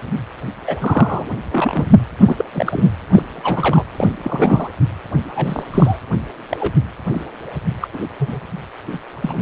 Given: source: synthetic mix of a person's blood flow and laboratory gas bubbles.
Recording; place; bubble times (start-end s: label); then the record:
Doppler ultrasound of blood flow; precordium
0.67-0.76 s: bubbles
0.80-1.36 s: bubbles
1.52-1.87 s: bubbles
2.18-2.45 s: bubbles
2.53-2.89 s: bubbles
3.09-3.23 s: bubbles
3.37-3.83 s: bubbles
3.96-4.08 s: bubbles
4.24-4.69 s: bubbles
5.33-5.62 s: bubbles
5.71-5.96 s: bubbles
6.50-6.72 s: bubbles
7.12-7.23 s: bubbles
7.80-7.88 s: bubbles
7.93-7.98 s: bubbles
8.20-8.40 s: bubbles
8.93-8.99 s: bubbles
9.22-9.42 s: bubbles
From the record:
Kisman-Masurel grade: 242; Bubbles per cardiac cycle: several, 3 to 8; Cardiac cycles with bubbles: 100%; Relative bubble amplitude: moderate (0.250 to 0.450); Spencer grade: 3 (all of the cardiac periods contain showers or single bubble signals, but not dominating or overriding the cardiac motion signals); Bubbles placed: anywhere in the cardiac cycle